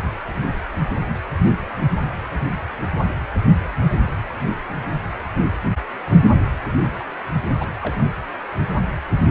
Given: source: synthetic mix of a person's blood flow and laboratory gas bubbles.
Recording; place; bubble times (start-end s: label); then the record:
Doppler ultrasound of blood flow; precordium
7.59-7.69 s: bubbles
7.82-7.95 s: bubbles
From the record:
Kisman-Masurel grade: 111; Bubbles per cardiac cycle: 1 to 2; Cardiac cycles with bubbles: 1 to 10%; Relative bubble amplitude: barely perceptible (0.100 to 0.250); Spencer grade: 1 (occasional bubble signal discernible with the cardiac motion signal, with majority of cardiac periods free of bubbles); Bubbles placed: anywhere in the cardiac cycle